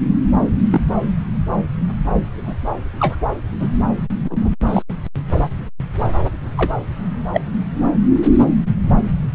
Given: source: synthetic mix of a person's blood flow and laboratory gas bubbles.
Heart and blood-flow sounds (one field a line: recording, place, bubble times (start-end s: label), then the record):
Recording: Doppler ultrasound of blood flow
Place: subclavian vein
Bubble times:
0.70-0.81 s: bubbles
2.35-2.55 s: bubbles
2.99-3.16 s: bubbles
3.60-3.69 s: bubbles
4.25-4.38 s: bubbles
4.41-4.50 s: bubbles
4.66-4.83 s: bubbles
5.33-5.38 s: bubbles
6.57-6.71 s: bubbles
7.33-7.41 s: bubbles
From the record:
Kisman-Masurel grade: 122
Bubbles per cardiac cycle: 1 to 2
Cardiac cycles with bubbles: 10 to 50%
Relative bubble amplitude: moderate (0.250 to 0.450)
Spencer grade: 2 (many but less than half of the cardiac periods contain bubble signals, singularly or in groups)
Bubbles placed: anywhere in the cardiac cycle